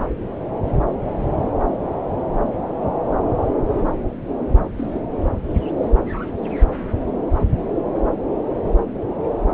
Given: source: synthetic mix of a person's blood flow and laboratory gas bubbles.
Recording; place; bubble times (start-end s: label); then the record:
Doppler ultrasound of blood flow; subclavian vein
4.77-5.02 s: bubbles
From the record:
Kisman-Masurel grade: 112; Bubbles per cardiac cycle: 1 to 2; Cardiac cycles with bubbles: 1 to 10%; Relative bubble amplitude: moderate (0.250 to 0.450); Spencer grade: 1 (occasional bubble signal discernible with the cardiac motion signal, with majority of cardiac periods free of bubbles); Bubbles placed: anywhere in the cardiac cycle